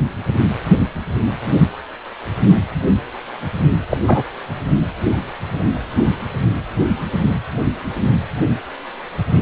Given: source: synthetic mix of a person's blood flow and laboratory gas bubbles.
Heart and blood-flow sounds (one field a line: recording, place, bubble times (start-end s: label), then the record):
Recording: Doppler ultrasound of blood flow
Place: precordium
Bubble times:
3.90-3.98 s: bubbles
4.06-4.23 s: bubbles
From the record:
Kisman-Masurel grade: 113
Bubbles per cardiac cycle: 1 to 2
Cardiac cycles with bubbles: 1 to 10%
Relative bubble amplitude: loud (0.450 to 0.775)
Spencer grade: 1 (occasional bubble signal discernible with the cardiac motion signal, with majority of cardiac periods free of bubbles)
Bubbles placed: anywhere in the cardiac cycle